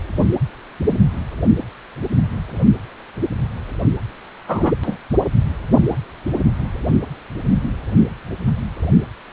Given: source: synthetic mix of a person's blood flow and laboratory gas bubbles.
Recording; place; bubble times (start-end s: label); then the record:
Doppler ultrasound of blood flow; precordium
4.47-4.72 s: bubbles
4.83-4.96 s: bubbles
From the record:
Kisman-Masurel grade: 213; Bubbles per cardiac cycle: several, 3 to 8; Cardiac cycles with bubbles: 1 to 10%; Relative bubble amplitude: loud (0.450 to 0.775); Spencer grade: 1 (occasional bubble signal discernible with the cardiac motion signal, with majority of cardiac periods free of bubbles); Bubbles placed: only in the low amplitude regions of the cardiac cycle